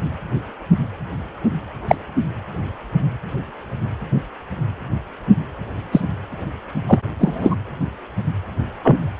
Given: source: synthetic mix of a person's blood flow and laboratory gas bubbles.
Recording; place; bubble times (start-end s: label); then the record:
Doppler ultrasound of blood flow; precordium
1.88-1.96 s: bubbles
5.92-6.00 s: bubbles
6.88-6.99 s: bubbles
7.19-7.57 s: bubbles
8.82-9.04 s: bubbles
From the record:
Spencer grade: 2 (many but less than half of the cardiac periods contain bubble signals, singularly or in groups); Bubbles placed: anywhere in the cardiac cycle